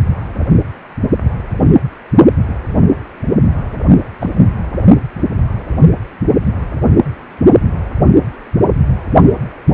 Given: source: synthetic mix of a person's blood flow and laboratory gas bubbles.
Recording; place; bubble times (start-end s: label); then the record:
Doppler ultrasound of blood flow; precordium
4.21-4.30 s: bubbles
From the record:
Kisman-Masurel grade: 112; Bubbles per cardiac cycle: 1 to 2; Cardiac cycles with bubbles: 1 to 10%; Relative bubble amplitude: moderate (0.250 to 0.450); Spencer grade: 1 (occasional bubble signal discernible with the cardiac motion signal, with majority of cardiac periods free of bubbles); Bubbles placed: only in the low amplitude regions of the cardiac cycle